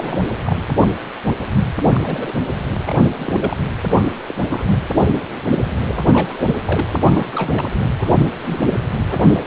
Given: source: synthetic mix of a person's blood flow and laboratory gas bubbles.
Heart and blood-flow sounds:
Doppler ultrasound of blood flow; precordium
0.00-0.21 s: bubbles
0.44-0.55 s: bubbles
1.93-2.01 s: bubbles
2.03-2.32 s: bubbles
2.85-3.07 s: bubbles
3.17-3.66 s: bubbles
3.90-4.17 s: bubbles
4.26-4.34 s: bubbles
4.48-4.63 s: bubbles
5.94-6.04 s: bubbles
6.12-6.55 s: bubbles
6.65-6.88 s: bubbles
6.99-7.72 s: bubbles
7.99-8.12 s: bubbles
8.17-8.31 s: bubbles
8.43-8.59 s: bubbles
9.08-9.43 s: bubbles
From the record:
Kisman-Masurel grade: 232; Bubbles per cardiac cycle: several, 3 to 8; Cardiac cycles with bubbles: 50 to 99%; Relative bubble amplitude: moderate (0.250 to 0.450); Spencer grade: 3 (all of the cardiac periods contain showers or single bubble signals, but not dominating or overriding the cardiac motion signals); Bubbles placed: anywhere in the cardiac cycle

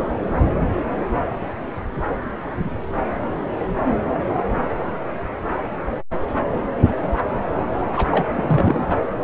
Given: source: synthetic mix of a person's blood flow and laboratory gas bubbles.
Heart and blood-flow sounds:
Doppler ultrasound of blood flow; subclavian vein
7.95-8.27 s: bubbles
8.33-8.94 s: bubbles
From the record:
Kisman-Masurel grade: 212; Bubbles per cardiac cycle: several, 3 to 8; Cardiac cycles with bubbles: 1 to 10%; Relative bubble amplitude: moderate (0.250 to 0.450); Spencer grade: 1 (occasional bubble signal discernible with the cardiac motion signal, with majority of cardiac periods free of bubbles); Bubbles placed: anywhere in the cardiac cycle

